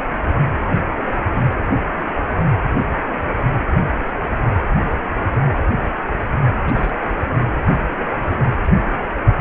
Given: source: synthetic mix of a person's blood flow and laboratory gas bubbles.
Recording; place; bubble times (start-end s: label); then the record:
Doppler ultrasound of blood flow; precordium
6.66-6.96 s: bubbles
7.33-7.40 s: bubbles
From the record:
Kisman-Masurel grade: 111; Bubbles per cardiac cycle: 1 to 2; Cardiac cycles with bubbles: 1 to 10%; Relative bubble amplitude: barely perceptible (0.100 to 0.250); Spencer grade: 1 (occasional bubble signal discernible with the cardiac motion signal, with majority of cardiac periods free of bubbles); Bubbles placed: anywhere in the cardiac cycle